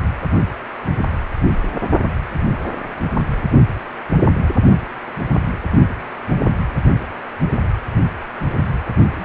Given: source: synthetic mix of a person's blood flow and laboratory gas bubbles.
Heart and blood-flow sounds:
Doppler ultrasound of blood flow; precordium
9.15-9.25 s: bubbles
From the record:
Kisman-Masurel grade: 112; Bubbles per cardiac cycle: 1 to 2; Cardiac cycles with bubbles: 1 to 10%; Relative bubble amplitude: moderate (0.250 to 0.450); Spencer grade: 1 (occasional bubble signal discernible with the cardiac motion signal, with majority of cardiac periods free of bubbles); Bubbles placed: anywhere in the cardiac cycle

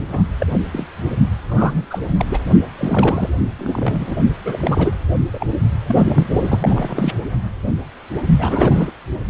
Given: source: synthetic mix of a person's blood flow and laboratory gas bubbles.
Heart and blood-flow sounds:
Doppler ultrasound of blood flow; precordium
0.08-0.23 s: bubbles
0.40-0.46 s: bubbles
0.53-0.58 s: bubbles
0.72-0.86 s: bubbles
1.49-1.86 s: bubbles
1.91-1.99 s: bubbles
2.19-2.25 s: bubbles
2.29-2.39 s: bubbles
2.78-3.29 s: bubbles
3.58-4.16 s: bubbles
4.44-4.94 s: bubbles
5.33-5.46 s: bubbles
5.56-5.65 s: bubbles
5.88-6.30 s: bubbles
6.43-7.12 s: bubbles
8.38-8.92 s: bubbles
From the record:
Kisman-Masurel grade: 332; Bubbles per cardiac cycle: rolling drumbeat, 9 or more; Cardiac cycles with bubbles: 50 to 99%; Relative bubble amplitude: moderate (0.250 to 0.450); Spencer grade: 3 (all of the cardiac periods contain showers or single bubble signals, but not dominating or overriding the cardiac motion signals); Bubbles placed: only in the low amplitude regions of the cardiac cycle

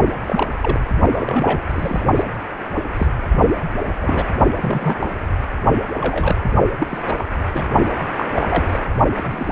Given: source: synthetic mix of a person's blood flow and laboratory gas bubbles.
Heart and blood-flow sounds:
Doppler ultrasound of blood flow; precordium
0.27-0.80 s: bubbles
1.11-1.66 s: bubbles
1.69-2.04 s: bubbles
2.15-2.23 s: bubbles
2.96-3.07 s: bubbles
4.02-4.28 s: bubbles
4.56-5.11 s: bubbles
6.01-6.38 s: bubbles
6.78-7.03 s: bubbles
7.07-7.25 s: bubbles
7.54-7.64 s: bubbles
7.98-8.04 s: bubbles
8.16-8.25 s: bubbles
8.35-8.79 s: bubbles
9.14-9.52 s: bubbles
From the record:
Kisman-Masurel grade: 242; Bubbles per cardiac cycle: several, 3 to 8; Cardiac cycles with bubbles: 100%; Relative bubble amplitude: moderate (0.250 to 0.450); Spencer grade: 3 (all of the cardiac periods contain showers or single bubble signals, but not dominating or overriding the cardiac motion signals); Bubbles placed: only in the low amplitude regions of the cardiac cycle

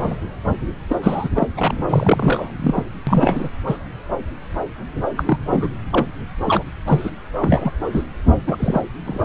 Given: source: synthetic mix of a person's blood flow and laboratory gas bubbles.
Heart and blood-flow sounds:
Doppler ultrasound of blood flow; subclavian vein
0.00-0.16 s: bubbles
0.87-0.96 s: bubbles
1.02-1.29 s: bubbles
1.35-1.48 s: bubbles
1.56-1.74 s: bubbles
1.89-2.50 s: bubbles
2.59-2.84 s: bubbles
3.07-3.49 s: bubbles
3.66-3.77 s: bubbles
5.17-5.38 s: bubbles
5.50-5.70 s: bubbles
5.93-6.06 s: bubbles
6.46-6.64 s: bubbles
6.87-7.11 s: bubbles
7.39-7.72 s: bubbles
7.92-8.04 s: bubbles
8.47-8.81 s: bubbles
9.05-9.25 s: bubbles
From the record:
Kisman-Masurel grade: 232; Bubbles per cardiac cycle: several, 3 to 8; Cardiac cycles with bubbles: 50 to 99%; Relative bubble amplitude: moderate (0.250 to 0.450); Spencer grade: 3 (all of the cardiac periods contain showers or single bubble signals, but not dominating or overriding the cardiac motion signals); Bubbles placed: anywhere in the cardiac cycle

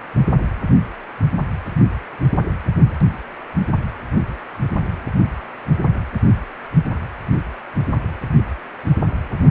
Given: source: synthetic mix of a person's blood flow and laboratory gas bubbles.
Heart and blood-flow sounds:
Doppler ultrasound of blood flow; precordium
no bubbles
From the record:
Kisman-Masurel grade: 000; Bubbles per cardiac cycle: 0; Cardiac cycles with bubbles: 0%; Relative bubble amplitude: no bubbles discernible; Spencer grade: 0 (complete lack of bubble signals)

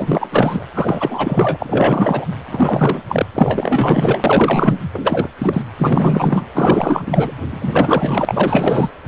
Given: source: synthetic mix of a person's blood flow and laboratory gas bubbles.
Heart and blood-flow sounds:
Doppler ultrasound of blood flow; precordium
0.00-0.65 s: bubbles
0.74-2.25 s: bubbles
2.51-3.02 s: bubbles
3.08-3.26 s: bubbles
3.34-4.77 s: bubbles
4.93-5.28 s: bubbles
5.38-5.62 s: bubbles
5.78-6.45 s: bubbles
6.54-7.32 s: bubbles
7.50-8.89 s: bubbles
From the record:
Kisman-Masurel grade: 444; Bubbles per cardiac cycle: continuous sound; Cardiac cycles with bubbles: 100%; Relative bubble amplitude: maximal (0.775 to 0.999); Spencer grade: 4 (maximum detectable bubble signal sounding continuously throughout systole and diastole of every cardiac period, and overriding the amplitude of the normal cardiac signals); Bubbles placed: anywhere in the cardiac cycle

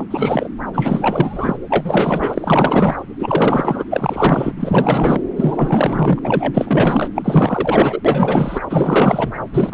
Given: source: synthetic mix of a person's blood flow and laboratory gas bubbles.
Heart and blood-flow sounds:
Doppler ultrasound of blood flow; subclavian vein
0.00-0.04 s: bubbles
0.10-0.50 s: bubbles
0.73-1.57 s: bubbles
1.70-3.05 s: bubbles
3.19-3.84 s: bubbles
3.91-4.53 s: bubbles
4.60-5.20 s: bubbles
5.36-6.19 s: bubbles
6.23-7.09 s: bubbles
7.14-8.00 s: bubbles
8.04-8.60 s: bubbles
8.70-9.33 s: bubbles
9.53-9.74 s: bubbles
From the record:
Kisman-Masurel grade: 444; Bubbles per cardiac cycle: continuous sound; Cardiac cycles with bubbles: 100%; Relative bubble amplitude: maximal (0.775 to 0.999); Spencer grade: 4 (maximum detectable bubble signal sounding continuously throughout systole and diastole of every cardiac period, and overriding the amplitude of the normal cardiac signals); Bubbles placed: anywhere in the cardiac cycle

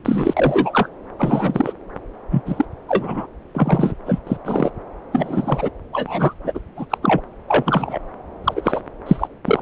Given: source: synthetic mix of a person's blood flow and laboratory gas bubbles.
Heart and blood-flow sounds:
Doppler ultrasound of blood flow; subclavian vein
0.04-0.34 s: bubbles
0.36-0.88 s: bubbles
1.18-1.73 s: bubbles
2.30-2.42 s: bubbles
2.46-2.65 s: bubbles
2.88-3.27 s: bubbles
3.53-3.94 s: bubbles
4.06-4.20 s: bubbles
4.27-4.37 s: bubbles
4.45-4.70 s: bubbles
5.12-5.70 s: bubbles
5.93-6.33 s: bubbles
6.44-6.60 s: bubbles
6.76-6.86 s: bubbles
6.90-6.98 s: bubbles
7.02-7.21 s: bubbles
7.48-7.99 s: bubbles
8.44-8.81 s: bubbles
9.06-9.27 s: bubbles
9.46-9.62 s: bubbles
From the record:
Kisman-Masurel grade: 233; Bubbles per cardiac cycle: several, 3 to 8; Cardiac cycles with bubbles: 50 to 99%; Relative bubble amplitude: loud (0.450 to 0.775); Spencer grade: 3 (all of the cardiac periods contain showers or single bubble signals, but not dominating or overriding the cardiac motion signals); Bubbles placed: anywhere in the cardiac cycle

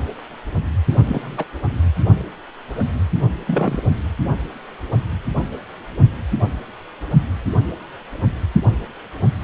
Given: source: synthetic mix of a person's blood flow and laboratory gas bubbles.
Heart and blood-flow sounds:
Doppler ultrasound of blood flow; precordium
0.94-1.46 s: bubbles
3.47-3.83 s: bubbles
From the record:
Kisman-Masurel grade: 222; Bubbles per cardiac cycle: several, 3 to 8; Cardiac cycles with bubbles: 10 to 50%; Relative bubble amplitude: moderate (0.250 to 0.450); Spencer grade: 2 (many but less than half of the cardiac periods contain bubble signals, singularly or in groups); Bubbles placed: only in the low amplitude regions of the cardiac cycle

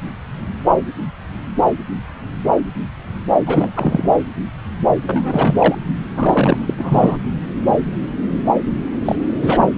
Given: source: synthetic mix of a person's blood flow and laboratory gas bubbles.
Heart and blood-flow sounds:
Doppler ultrasound of blood flow; subclavian vein
3.46-4.08 s: bubbles
5.06-5.75 s: bubbles
6.14-6.58 s: bubbles
6.60-6.74 s: bubbles
6.78-7.17 s: bubbles
9.05-9.16 s: bubbles
9.41-9.68 s: bubbles
From the record:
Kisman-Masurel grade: 223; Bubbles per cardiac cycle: several, 3 to 8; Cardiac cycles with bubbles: 10 to 50%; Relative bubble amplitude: loud (0.450 to 0.775); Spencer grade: 2 (many but less than half of the cardiac periods contain bubble signals, singularly or in groups); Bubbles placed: anywhere in the cardiac cycle

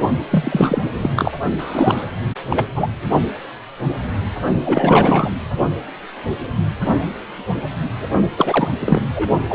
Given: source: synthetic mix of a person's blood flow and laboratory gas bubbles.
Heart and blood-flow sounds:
Doppler ultrasound of blood flow; precordium
0.32-0.91 s: bubbles
1.02-1.10 s: bubbles
1.16-1.31 s: bubbles
1.59-2.04 s: bubbles
2.50-2.65 s: bubbles
2.75-2.87 s: bubbles
4.64-5.30 s: bubbles
8.38-8.68 s: bubbles
8.80-9.02 s: bubbles
9.15-9.29 s: bubbles
9.49-9.55 s: bubbles
From the record:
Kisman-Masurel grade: 333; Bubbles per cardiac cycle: rolling drumbeat, 9 or more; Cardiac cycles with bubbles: 50 to 99%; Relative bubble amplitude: loud (0.450 to 0.775); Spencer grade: 3 (all of the cardiac periods contain showers or single bubble signals, but not dominating or overriding the cardiac motion signals); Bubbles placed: only in the low amplitude regions of the cardiac cycle

